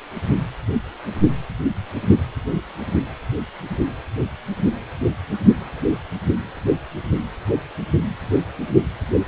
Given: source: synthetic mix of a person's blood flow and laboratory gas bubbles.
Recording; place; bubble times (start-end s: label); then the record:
Doppler ultrasound of blood flow; precordium
no bubbles
From the record:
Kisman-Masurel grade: 000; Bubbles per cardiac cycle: 0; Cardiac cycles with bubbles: 0%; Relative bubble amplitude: no bubbles discernible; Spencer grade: 0 (complete lack of bubble signals)